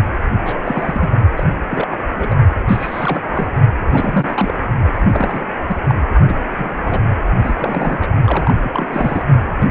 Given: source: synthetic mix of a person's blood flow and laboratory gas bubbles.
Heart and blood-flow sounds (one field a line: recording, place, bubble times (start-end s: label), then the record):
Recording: Doppler ultrasound of blood flow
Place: precordium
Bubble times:
0.45-1.21 s: bubbles
1.36-1.55 s: bubbles
1.70-1.88 s: bubbles
1.91-1.97 s: bubbles
2.07-2.38 s: bubbles
2.68-3.48 s: bubbles
3.92-4.54 s: bubbles
4.96-5.45 s: bubbles
5.67-5.76 s: bubbles
5.88-6.00 s: bubbles
6.29-6.34 s: bubbles
6.51-7.02 s: bubbles
7.42-7.98 s: bubbles
8.02-8.07 s: bubbles
8.24-8.54 s: bubbles
8.61-8.88 s: bubbles
8.91-9.25 s: bubbles
9.61-9.65 s: bubbles
9.68-9.71 s: bubbles
From the record:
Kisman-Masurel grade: 242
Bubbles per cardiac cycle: several, 3 to 8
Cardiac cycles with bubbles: 100%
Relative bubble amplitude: moderate (0.250 to 0.450)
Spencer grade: 3 (all of the cardiac periods contain showers or single bubble signals, but not dominating or overriding the cardiac motion signals)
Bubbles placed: anywhere in the cardiac cycle